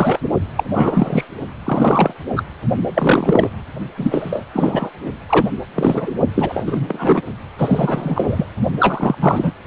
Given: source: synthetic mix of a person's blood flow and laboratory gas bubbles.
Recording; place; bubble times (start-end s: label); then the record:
Doppler ultrasound of blood flow; precordium
0.00-0.20 s: bubbles
0.55-0.64 s: bubbles
0.73-1.24 s: bubbles
1.65-2.13 s: bubbles
2.36-2.43 s: bubbles
2.94-3.50 s: bubbles
3.97-4.44 s: bubbles
4.53-4.89 s: bubbles
5.29-5.46 s: bubbles
5.76-6.12 s: bubbles
6.34-6.64 s: bubbles
6.66-7.21 s: bubbles
7.58-8.46 s: bubbles
8.79-9.15 s: bubbles
9.20-9.52 s: bubbles
From the record:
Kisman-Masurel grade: 343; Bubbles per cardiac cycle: rolling drumbeat, 9 or more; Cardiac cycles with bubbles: 100%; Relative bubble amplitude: loud (0.450 to 0.775); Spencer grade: 3 (all of the cardiac periods contain showers or single bubble signals, but not dominating or overriding the cardiac motion signals); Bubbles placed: only in the low amplitude regions of the cardiac cycle